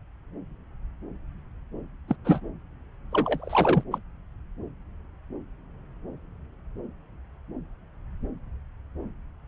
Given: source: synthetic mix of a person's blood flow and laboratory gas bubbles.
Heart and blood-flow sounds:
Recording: Doppler ultrasound of blood flow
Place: subclavian vein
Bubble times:
2.08-2.16 s: bubbles
2.25-2.40 s: bubbles
3.11-3.83 s: bubbles
3.92-3.99 s: bubbles
From the record:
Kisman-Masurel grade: 222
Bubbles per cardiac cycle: several, 3 to 8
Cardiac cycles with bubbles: 10 to 50%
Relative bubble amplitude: moderate (0.250 to 0.450)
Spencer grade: 2 (many but less than half of the cardiac periods contain bubble signals, singularly or in groups)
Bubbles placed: anywhere in the cardiac cycle

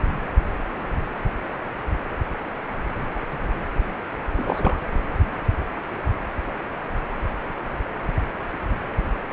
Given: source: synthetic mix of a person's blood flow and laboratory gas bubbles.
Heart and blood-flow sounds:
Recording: Doppler ultrasound of blood flow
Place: precordium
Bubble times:
4.38-4.77 s: bubbles
From the record:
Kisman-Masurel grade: 211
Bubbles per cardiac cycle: several, 3 to 8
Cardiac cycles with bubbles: 1 to 10%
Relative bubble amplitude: barely perceptible (0.100 to 0.250)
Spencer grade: 1 (occasional bubble signal discernible with the cardiac motion signal, with majority of cardiac periods free of bubbles)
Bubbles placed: anywhere in the cardiac cycle

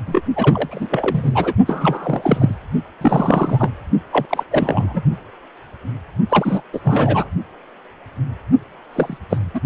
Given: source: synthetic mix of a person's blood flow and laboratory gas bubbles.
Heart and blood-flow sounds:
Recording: Doppler ultrasound of blood flow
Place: precordium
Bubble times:
0.06-0.21 s: bubbles
0.35-1.53 s: bubbles
1.66-2.55 s: bubbles
3.01-3.72 s: bubbles
4.12-4.26 s: bubbles
4.29-4.44 s: bubbles
4.51-5.02 s: bubbles
6.29-6.62 s: bubbles
6.73-6.80 s: bubbles
6.84-7.30 s: bubbles
8.93-9.18 s: bubbles
9.29-9.38 s: bubbles
9.54-9.60 s: bubbles
9.64-9.66 s: bubbles
From the record:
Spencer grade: 3 (all of the cardiac periods contain showers or single bubble signals, but not dominating or overriding the cardiac motion signals)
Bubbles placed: only in the low amplitude regions of the cardiac cycle

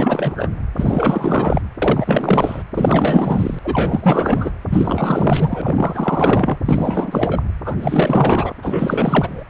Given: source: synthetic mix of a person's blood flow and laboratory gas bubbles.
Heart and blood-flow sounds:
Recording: Doppler ultrasound of blood flow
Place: precordium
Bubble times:
0.00-0.49 s: bubbles
0.76-1.62 s: bubbles
1.82-2.63 s: bubbles
2.74-3.59 s: bubbles
3.64-4.50 s: bubbles
4.69-6.58 s: bubbles
6.65-7.42 s: bubbles
7.63-8.54 s: bubbles
8.62-9.45 s: bubbles
From the record:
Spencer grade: 4 (maximum detectable bubble signal sounding continuously throughout systole and diastole of every cardiac period, and overriding the amplitude of the normal cardiac signals)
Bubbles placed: anywhere in the cardiac cycle

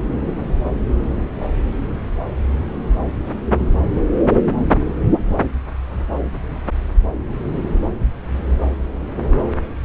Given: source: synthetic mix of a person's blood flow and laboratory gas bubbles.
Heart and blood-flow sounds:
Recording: Doppler ultrasound of blood flow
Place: subclavian vein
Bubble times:
no bubbles
From the record:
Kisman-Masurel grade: 000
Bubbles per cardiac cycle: 0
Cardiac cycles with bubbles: 0%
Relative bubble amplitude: no bubbles discernible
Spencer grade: 0 (complete lack of bubble signals)

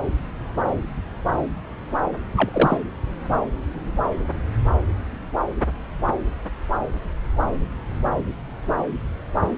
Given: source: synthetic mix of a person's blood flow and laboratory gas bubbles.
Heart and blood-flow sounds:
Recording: Doppler ultrasound of blood flow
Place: subclavian vein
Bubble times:
2.36-2.50 s: bubbles
2.52-2.77 s: bubbles
From the record:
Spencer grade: 1 (occasional bubble signal discernible with the cardiac motion signal, with majority of cardiac periods free of bubbles)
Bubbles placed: anywhere in the cardiac cycle

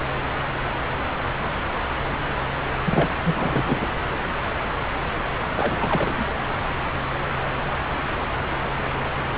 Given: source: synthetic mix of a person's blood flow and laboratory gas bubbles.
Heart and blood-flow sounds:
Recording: Doppler ultrasound of blood flow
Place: subclavian vein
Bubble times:
2.85-3.09 s: bubbles
3.24-3.88 s: bubbles
5.55-5.77 s: bubbles
5.79-6.28 s: bubbles
6.62-6.67 s: bubbles
From the record:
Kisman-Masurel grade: 222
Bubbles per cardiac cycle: several, 3 to 8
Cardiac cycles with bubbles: 10 to 50%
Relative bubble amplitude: moderate (0.250 to 0.450)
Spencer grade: 2 (many but less than half of the cardiac periods contain bubble signals, singularly or in groups)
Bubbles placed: anywhere in the cardiac cycle

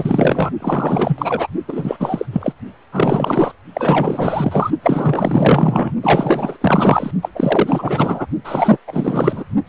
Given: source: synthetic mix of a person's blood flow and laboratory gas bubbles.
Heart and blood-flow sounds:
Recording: Doppler ultrasound of blood flow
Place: precordium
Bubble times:
0.00-0.51 s: bubbles
0.60-1.47 s: bubbles
1.68-1.97 s: bubbles
2.00-2.25 s: bubbles
2.32-2.52 s: bubbles
2.92-3.52 s: bubbles
3.74-4.71 s: bubbles
4.83-5.92 s: bubbles
6.03-6.57 s: bubbles
6.61-7.11 s: bubbles
7.22-7.29 s: bubbles
7.35-8.26 s: bubbles
8.44-8.78 s: bubbles
8.87-9.44 s: bubbles
9.66-9.69 s: bubbles
From the record:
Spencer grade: 4 (maximum detectable bubble signal sounding continuously throughout systole and diastole of every cardiac period, and overriding the amplitude of the normal cardiac signals)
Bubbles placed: only in the low amplitude regions of the cardiac cycle

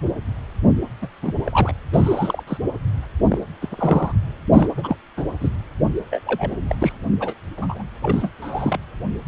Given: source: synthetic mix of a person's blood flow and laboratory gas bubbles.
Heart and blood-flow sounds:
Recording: Doppler ultrasound of blood flow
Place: precordium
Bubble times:
1.02-1.07 s: bubbles
1.22-1.34 s: bubbles
1.44-1.72 s: bubbles
1.93-2.43 s: bubbles
2.47-2.57 s: bubbles
3.28-3.38 s: bubbles
3.61-4.12 s: bubbles
4.53-4.68 s: bubbles
4.77-4.96 s: bubbles
5.17-5.22 s: bubbles
5.40-5.50 s: bubbles
6.10-6.20 s: bubbles
6.26-6.56 s: bubbles
6.67-6.75 s: bubbles
6.79-6.92 s: bubbles
7.20-7.34 s: bubbles
7.57-7.83 s: bubbles
8.02-8.31 s: bubbles
8.41-8.79 s: bubbles
From the record:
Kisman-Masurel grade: 232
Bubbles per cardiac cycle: several, 3 to 8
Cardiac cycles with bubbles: 50 to 99%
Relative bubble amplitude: moderate (0.250 to 0.450)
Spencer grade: 3 (all of the cardiac periods contain showers or single bubble signals, but not dominating or overriding the cardiac motion signals)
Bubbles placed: anywhere in the cardiac cycle

